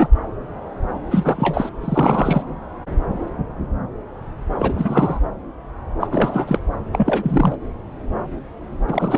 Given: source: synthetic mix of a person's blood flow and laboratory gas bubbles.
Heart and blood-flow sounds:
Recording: Doppler ultrasound of blood flow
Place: subclavian vein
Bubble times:
0.00-0.09 s: bubbles
1.10-1.69 s: bubbles
1.81-2.42 s: bubbles
4.60-5.20 s: bubbles
6.01-6.08 s: bubbles
6.11-6.58 s: bubbles
6.93-7.58 s: bubbles
8.88-9.18 s: bubbles
From the record:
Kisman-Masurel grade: 332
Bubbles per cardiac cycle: rolling drumbeat, 9 or more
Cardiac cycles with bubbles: 50 to 99%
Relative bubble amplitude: moderate (0.250 to 0.450)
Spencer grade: 3 (all of the cardiac periods contain showers or single bubble signals, but not dominating or overriding the cardiac motion signals)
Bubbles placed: anywhere in the cardiac cycle

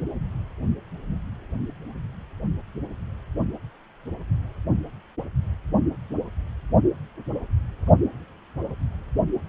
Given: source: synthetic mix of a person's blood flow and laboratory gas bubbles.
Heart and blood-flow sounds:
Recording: Doppler ultrasound of blood flow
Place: precordium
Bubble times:
no bubbles
From the record:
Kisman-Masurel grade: 000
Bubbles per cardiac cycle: 0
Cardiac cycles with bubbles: 0%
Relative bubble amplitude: no bubbles discernible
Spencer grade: 0 (complete lack of bubble signals)

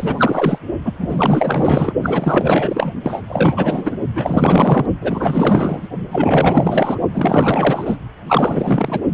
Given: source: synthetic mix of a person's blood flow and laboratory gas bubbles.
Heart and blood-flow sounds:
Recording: Doppler ultrasound of blood flow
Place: precordium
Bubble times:
0.00-0.58 s: bubbles
0.85-0.93 s: bubbles
0.98-1.93 s: bubbles
2.03-2.92 s: bubbles
3.03-3.21 s: bubbles
3.28-3.96 s: bubbles
4.15-4.86 s: bubbles
5.01-5.89 s: bubbles
6.12-6.98 s: bubbles
7.12-7.97 s: bubbles
8.26-9.00 s: bubbles
From the record:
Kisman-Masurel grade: 444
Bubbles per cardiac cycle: continuous sound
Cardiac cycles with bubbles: 100%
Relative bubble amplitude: maximal (0.775 to 0.999)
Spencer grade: 4 (maximum detectable bubble signal sounding continuously throughout systole and diastole of every cardiac period, and overriding the amplitude of the normal cardiac signals)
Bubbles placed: only in the low amplitude regions of the cardiac cycle

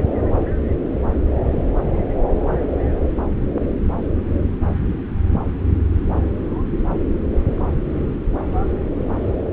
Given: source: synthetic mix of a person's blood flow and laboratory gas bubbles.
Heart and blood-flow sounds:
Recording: Doppler ultrasound of blood flow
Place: subclavian vein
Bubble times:
no bubbles
From the record:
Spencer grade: 0 (complete lack of bubble signals)

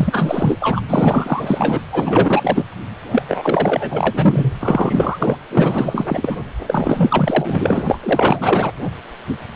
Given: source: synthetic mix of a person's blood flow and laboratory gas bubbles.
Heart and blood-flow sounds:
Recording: Doppler ultrasound of blood flow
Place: precordium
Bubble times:
0.00-0.81 s: bubbles
0.88-1.81 s: bubbles
1.92-2.64 s: bubbles
3.11-3.23 s: bubbles
3.28-5.36 s: bubbles
5.51-6.37 s: bubbles
6.68-7.83 s: bubbles
7.87-8.71 s: bubbles
From the record:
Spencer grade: 4 (maximum detectable bubble signal sounding continuously throughout systole and diastole of every cardiac period, and overriding the amplitude of the normal cardiac signals)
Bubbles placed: anywhere in the cardiac cycle

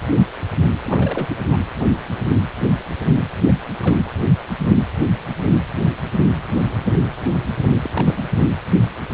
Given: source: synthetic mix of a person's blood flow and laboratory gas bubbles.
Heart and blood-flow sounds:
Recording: Doppler ultrasound of blood flow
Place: precordium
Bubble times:
0.84-1.37 s: bubbles
1.46-1.60 s: bubbles
3.46-3.56 s: bubbles
3.81-3.96 s: bubbles
7.83-8.24 s: bubbles
From the record:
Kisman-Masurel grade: 222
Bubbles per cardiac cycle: several, 3 to 8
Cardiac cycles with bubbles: 10 to 50%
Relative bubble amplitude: moderate (0.250 to 0.450)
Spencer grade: 2 (many but less than half of the cardiac periods contain bubble signals, singularly or in groups)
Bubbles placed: anywhere in the cardiac cycle

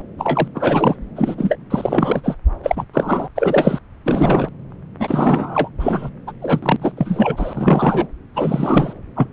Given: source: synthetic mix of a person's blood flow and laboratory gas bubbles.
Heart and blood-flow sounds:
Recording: Doppler ultrasound of blood flow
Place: subclavian vein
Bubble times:
0.18-0.48 s: bubbles
0.54-0.96 s: bubbles
1.16-1.35 s: bubbles
1.38-1.56 s: bubbles
1.70-2.21 s: bubbles
2.23-2.36 s: bubbles
2.63-2.85 s: bubbles
2.94-3.27 s: bubbles
3.35-3.79 s: bubbles
4.05-4.49 s: bubbles
5.00-5.70 s: bubbles
5.79-6.09 s: bubbles
6.27-6.32 s: bubbles
6.42-6.76 s: bubbles
6.82-6.92 s: bubbles
6.97-8.07 s: bubbles
8.34-8.93 s: bubbles
9.16-9.27 s: bubbles
From the record:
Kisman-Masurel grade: 343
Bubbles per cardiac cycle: rolling drumbeat, 9 or more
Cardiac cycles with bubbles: 100%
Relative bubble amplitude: loud (0.450 to 0.775)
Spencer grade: 3 (all of the cardiac periods contain showers or single bubble signals, but not dominating or overriding the cardiac motion signals)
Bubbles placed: anywhere in the cardiac cycle

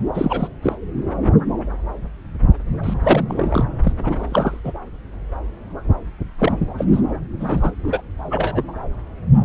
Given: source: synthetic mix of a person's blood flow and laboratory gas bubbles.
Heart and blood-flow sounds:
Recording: Doppler ultrasound of blood flow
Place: subclavian vein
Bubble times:
0.14-0.48 s: bubbles
0.62-0.75 s: bubbles
2.83-2.94 s: bubbles
3.02-3.24 s: bubbles
3.28-3.66 s: bubbles
3.83-3.93 s: bubbles
3.98-4.60 s: bubbles
4.64-4.73 s: bubbles
6.38-6.52 s: bubbles
6.78-6.86 s: bubbles
6.92-7.02 s: bubbles
7.40-7.72 s: bubbles
7.83-8.01 s: bubbles
8.30-8.63 s: bubbles
From the record:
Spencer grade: 3 (all of the cardiac periods contain showers or single bubble signals, but not dominating or overriding the cardiac motion signals)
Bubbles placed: anywhere in the cardiac cycle

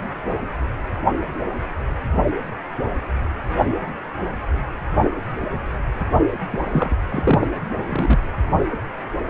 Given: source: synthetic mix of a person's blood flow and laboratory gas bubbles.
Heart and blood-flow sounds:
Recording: Doppler ultrasound of blood flow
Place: precordium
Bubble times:
6.51-6.94 s: bubbles
7.08-7.47 s: bubbles
7.86-8.20 s: bubbles
From the record:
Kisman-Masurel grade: 222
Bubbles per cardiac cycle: several, 3 to 8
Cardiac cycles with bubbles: 10 to 50%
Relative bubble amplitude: moderate (0.250 to 0.450)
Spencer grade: 2 (many but less than half of the cardiac periods contain bubble signals, singularly or in groups)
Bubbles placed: only in the low amplitude regions of the cardiac cycle

